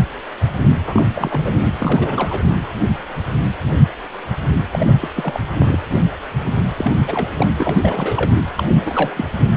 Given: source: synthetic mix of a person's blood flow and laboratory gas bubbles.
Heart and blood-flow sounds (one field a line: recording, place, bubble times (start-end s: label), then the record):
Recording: Doppler ultrasound of blood flow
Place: precordium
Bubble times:
0.84-1.72 s: bubbles
1.79-2.43 s: bubbles
4.71-4.93 s: bubbles
5.00-5.09 s: bubbles
5.16-5.42 s: bubbles
5.58-5.79 s: bubbles
6.76-6.95 s: bubbles
7.07-7.29 s: bubbles
7.37-7.47 s: bubbles
7.58-7.79 s: bubbles
7.82-8.31 s: bubbles
8.56-8.63 s: bubbles
8.67-9.25 s: bubbles
9.40-9.47 s: bubbles
From the record:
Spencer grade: 3 (all of the cardiac periods contain showers or single bubble signals, but not dominating or overriding the cardiac motion signals)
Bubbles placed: anywhere in the cardiac cycle